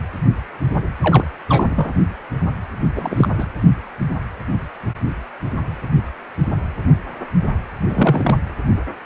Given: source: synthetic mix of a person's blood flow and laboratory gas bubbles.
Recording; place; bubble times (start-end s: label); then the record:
Doppler ultrasound of blood flow; precordium
1.01-1.24 s: bubbles
1.49-1.93 s: bubbles
2.95-3.28 s: bubbles
3.38-3.45 s: bubbles
7.87-8.37 s: bubbles
From the record:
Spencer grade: 2 (many but less than half of the cardiac periods contain bubble signals, singularly or in groups); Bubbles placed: anywhere in the cardiac cycle